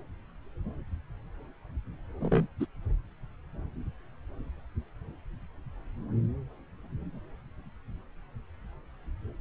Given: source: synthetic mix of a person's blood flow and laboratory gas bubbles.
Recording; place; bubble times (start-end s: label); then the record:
Doppler ultrasound of blood flow; subclavian vein
2.20-2.47 s: bubbles
2.60-2.66 s: bubbles
From the record:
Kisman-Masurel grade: 111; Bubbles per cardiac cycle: 1 to 2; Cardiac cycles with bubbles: 1 to 10%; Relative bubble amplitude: barely perceptible (0.100 to 0.250); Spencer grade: 1 (occasional bubble signal discernible with the cardiac motion signal, with majority of cardiac periods free of bubbles); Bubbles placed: anywhere in the cardiac cycle